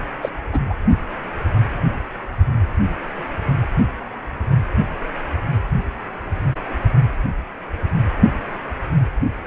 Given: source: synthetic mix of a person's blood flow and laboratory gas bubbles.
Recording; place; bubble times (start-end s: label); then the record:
Doppler ultrasound of blood flow; precordium
0.22-0.29 s: bubbles
0.53-0.59 s: bubbles
0.70-0.74 s: bubbles
From the record:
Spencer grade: 2 (many but less than half of the cardiac periods contain bubble signals, singularly or in groups); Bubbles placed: only in the low amplitude regions of the cardiac cycle